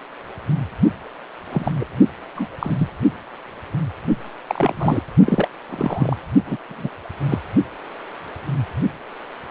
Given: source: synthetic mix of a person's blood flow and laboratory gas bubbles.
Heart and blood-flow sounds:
Doppler ultrasound of blood flow; precordium
1.51-1.71 s: bubbles
1.79-1.85 s: bubbles
2.35-2.48 s: bubbles
2.59-2.91 s: bubbles
4.47-4.73 s: bubbles
4.77-5.03 s: bubbles
5.24-5.48 s: bubbles
5.69-6.16 s: bubbles
6.46-6.56 s: bubbles
6.69-6.89 s: bubbles
7.29-7.39 s: bubbles
From the record:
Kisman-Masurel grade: 222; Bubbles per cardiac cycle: several, 3 to 8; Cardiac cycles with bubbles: 10 to 50%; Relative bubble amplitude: moderate (0.250 to 0.450); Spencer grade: 2 (many but less than half of the cardiac periods contain bubble signals, singularly or in groups); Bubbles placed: only in the low amplitude regions of the cardiac cycle

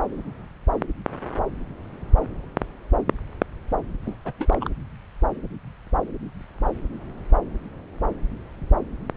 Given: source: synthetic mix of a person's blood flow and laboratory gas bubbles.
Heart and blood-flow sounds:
Doppler ultrasound of blood flow; subclavian vein
4.05-4.15 s: bubbles
4.25-4.32 s: bubbles
4.38-4.70 s: bubbles
From the record:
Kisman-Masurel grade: 221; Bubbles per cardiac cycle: several, 3 to 8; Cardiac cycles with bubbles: 10 to 50%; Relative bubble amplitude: barely perceptible (0.100 to 0.250); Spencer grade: 2 (many but less than half of the cardiac periods contain bubble signals, singularly or in groups); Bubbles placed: anywhere in the cardiac cycle

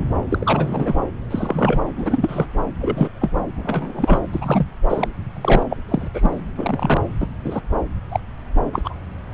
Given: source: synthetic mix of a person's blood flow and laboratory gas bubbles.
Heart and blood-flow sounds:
Doppler ultrasound of blood flow; subclavian vein
0.31-0.94 s: bubbles
1.30-1.83 s: bubbles
1.96-2.46 s: bubbles
2.81-3.10 s: bubbles
3.21-3.30 s: bubbles
3.56-4.20 s: bubbles
4.33-4.66 s: bubbles
4.88-5.08 s: bubbles
5.34-5.65 s: bubbles
5.70-5.77 s: bubbles
5.88-6.08 s: bubbles
6.13-6.30 s: bubbles
6.58-7.01 s: bubbles
7.20-7.28 s: bubbles
7.44-7.61 s: bubbles
8.11-8.20 s: bubbles
8.72-8.99 s: bubbles
From the record:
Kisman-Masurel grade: 243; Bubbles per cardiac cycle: several, 3 to 8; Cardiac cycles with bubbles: 100%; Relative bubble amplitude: loud (0.450 to 0.775); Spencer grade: 3 (all of the cardiac periods contain showers or single bubble signals, but not dominating or overriding the cardiac motion signals); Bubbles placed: anywhere in the cardiac cycle

